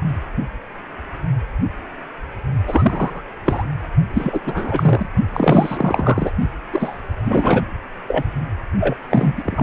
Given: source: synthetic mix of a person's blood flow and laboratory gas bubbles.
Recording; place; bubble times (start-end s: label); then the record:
Doppler ultrasound of blood flow; precordium
2.67-3.23 s: bubbles
3.45-3.64 s: bubbles
4.13-4.40 s: bubbles
4.46-5.06 s: bubbles
5.32-6.31 s: bubbles
6.72-7.00 s: bubbles
7.24-7.62 s: bubbles
8.07-8.23 s: bubbles
8.79-8.96 s: bubbles
9.10-9.63 s: bubbles
From the record:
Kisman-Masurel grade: 333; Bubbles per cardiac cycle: rolling drumbeat, 9 or more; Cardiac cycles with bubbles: 50 to 99%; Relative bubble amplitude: loud (0.450 to 0.775); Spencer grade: 3 (all of the cardiac periods contain showers or single bubble signals, but not dominating or overriding the cardiac motion signals); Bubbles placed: only in the low amplitude regions of the cardiac cycle